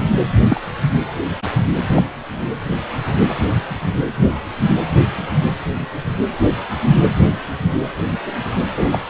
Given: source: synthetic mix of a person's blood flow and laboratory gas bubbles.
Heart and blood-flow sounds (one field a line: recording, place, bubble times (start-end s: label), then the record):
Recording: Doppler ultrasound of blood flow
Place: precordium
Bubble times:
0.50-0.61 s: bubbles
1.96-2.02 s: bubbles
8.77-8.99 s: bubbles
From the record:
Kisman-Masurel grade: 123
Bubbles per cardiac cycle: 1 to 2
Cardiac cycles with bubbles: 10 to 50%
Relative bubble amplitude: loud (0.450 to 0.775)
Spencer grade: 2 (many but less than half of the cardiac periods contain bubble signals, singularly or in groups)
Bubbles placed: anywhere in the cardiac cycle